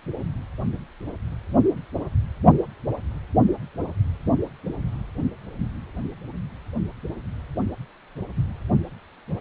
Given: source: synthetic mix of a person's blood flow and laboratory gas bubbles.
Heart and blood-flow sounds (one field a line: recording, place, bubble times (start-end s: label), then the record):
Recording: Doppler ultrasound of blood flow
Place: precordium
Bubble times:
no bubbles
From the record:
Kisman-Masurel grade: 000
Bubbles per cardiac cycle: 0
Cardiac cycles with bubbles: 0%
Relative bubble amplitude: no bubbles discernible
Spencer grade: 0 (complete lack of bubble signals)